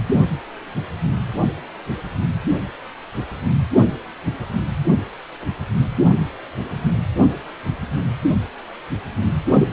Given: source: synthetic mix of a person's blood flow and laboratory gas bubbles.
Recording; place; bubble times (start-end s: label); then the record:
Doppler ultrasound of blood flow; precordium
9.50-9.68 s: bubbles
From the record:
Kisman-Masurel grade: 122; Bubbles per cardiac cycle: 1 to 2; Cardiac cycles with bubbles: 10 to 50%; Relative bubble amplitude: moderate (0.250 to 0.450); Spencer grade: 2 (many but less than half of the cardiac periods contain bubble signals, singularly or in groups); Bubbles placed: anywhere in the cardiac cycle